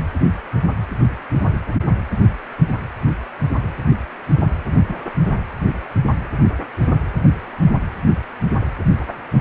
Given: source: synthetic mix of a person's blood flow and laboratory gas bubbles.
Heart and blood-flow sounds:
Doppler ultrasound of blood flow; precordium
4.88-4.96 s: bubbles
From the record:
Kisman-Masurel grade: 112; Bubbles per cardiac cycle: 1 to 2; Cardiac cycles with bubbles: 1 to 10%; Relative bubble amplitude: moderate (0.250 to 0.450); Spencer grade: 1 (occasional bubble signal discernible with the cardiac motion signal, with majority of cardiac periods free of bubbles); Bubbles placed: anywhere in the cardiac cycle

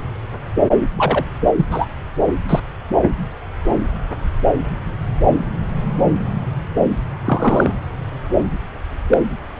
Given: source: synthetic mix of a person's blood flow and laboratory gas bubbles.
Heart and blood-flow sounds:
Doppler ultrasound of blood flow; subclavian vein
0.98-1.24 s: bubbles
1.56-1.66 s: bubbles
1.71-1.86 s: bubbles
2.49-2.60 s: bubbles
7.25-7.74 s: bubbles
9.09-9.18 s: bubbles
From the record:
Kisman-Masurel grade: 123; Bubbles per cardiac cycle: 1 to 2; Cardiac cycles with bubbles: 10 to 50%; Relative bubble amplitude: loud (0.450 to 0.775); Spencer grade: 2 (many but less than half of the cardiac periods contain bubble signals, singularly or in groups); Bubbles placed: anywhere in the cardiac cycle

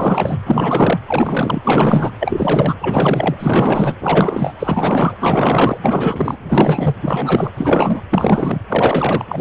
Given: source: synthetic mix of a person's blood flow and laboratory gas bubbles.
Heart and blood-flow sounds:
Doppler ultrasound of blood flow; precordium
0.00-0.37 s: bubbles
0.45-0.99 s: bubbles
1.06-2.12 s: bubbles
2.19-2.75 s: bubbles
2.79-3.36 s: bubbles
3.39-3.94 s: bubbles
4.00-4.54 s: bubbles
4.59-5.14 s: bubbles
5.19-5.78 s: bubbles
5.83-6.38 s: bubbles
6.48-6.96 s: bubbles
7.01-7.50 s: bubbles
7.56-8.03 s: bubbles
8.10-8.61 s: bubbles
8.69-9.25 s: bubbles
9.28-9.41 s: bubbles
From the record:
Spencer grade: 4 (maximum detectable bubble signal sounding continuously throughout systole and diastole of every cardiac period, and overriding the amplitude of the normal cardiac signals); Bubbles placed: anywhere in the cardiac cycle

